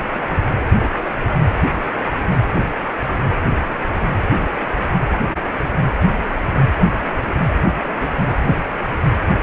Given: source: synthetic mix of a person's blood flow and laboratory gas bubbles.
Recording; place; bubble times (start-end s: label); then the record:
Doppler ultrasound of blood flow; precordium
no bubbles
From the record:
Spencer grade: 0 (complete lack of bubble signals)